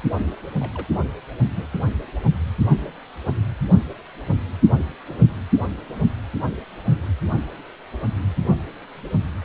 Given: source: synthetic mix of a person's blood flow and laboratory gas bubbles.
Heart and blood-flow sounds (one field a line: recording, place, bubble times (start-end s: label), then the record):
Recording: Doppler ultrasound of blood flow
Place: precordium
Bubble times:
0.59-0.86 s: bubbles
1.50-1.67 s: bubbles
4.78-4.85 s: bubbles
5.05-5.17 s: bubbles
From the record:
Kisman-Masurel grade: 121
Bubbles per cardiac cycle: 1 to 2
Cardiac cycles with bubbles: 10 to 50%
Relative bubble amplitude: barely perceptible (0.100 to 0.250)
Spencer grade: 2 (many but less than half of the cardiac periods contain bubble signals, singularly or in groups)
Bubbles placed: anywhere in the cardiac cycle